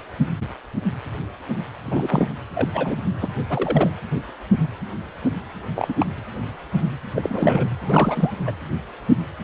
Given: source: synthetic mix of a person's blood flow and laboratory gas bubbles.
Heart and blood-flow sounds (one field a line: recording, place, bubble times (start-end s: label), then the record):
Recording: Doppler ultrasound of blood flow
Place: precordium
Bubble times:
1.85-2.28 s: bubbles
2.54-2.69 s: bubbles
2.73-2.96 s: bubbles
3.21-3.28 s: bubbles
3.49-3.90 s: bubbles
5.75-5.94 s: bubbles
5.99-6.07 s: bubbles
7.16-7.66 s: bubbles
7.84-8.35 s: bubbles
8.46-8.52 s: bubbles
From the record:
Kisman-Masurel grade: 222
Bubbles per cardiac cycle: several, 3 to 8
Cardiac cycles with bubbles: 10 to 50%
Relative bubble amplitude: moderate (0.250 to 0.450)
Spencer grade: 2 (many but less than half of the cardiac periods contain bubble signals, singularly or in groups)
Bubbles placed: anywhere in the cardiac cycle